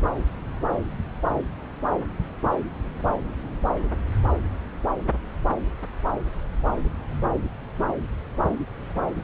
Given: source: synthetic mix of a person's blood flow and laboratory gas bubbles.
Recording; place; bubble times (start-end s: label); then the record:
Doppler ultrasound of blood flow; subclavian vein
no bubbles
From the record:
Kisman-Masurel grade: 000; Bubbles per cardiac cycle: 0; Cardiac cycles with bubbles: 0%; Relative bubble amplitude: no bubbles discernible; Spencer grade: 0 (complete lack of bubble signals)